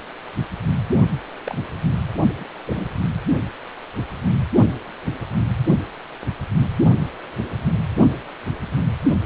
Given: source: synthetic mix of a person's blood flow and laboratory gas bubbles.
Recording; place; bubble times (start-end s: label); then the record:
Doppler ultrasound of blood flow; precordium
1.44-1.58 s: bubbles
2.40-2.46 s: bubbles
2.66-2.88 s: bubbles
From the record:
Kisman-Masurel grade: 121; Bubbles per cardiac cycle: 1 to 2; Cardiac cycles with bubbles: 10 to 50%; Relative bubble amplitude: barely perceptible (0.100 to 0.250); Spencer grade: 2 (many but less than half of the cardiac periods contain bubble signals, singularly or in groups); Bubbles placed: only in the low amplitude regions of the cardiac cycle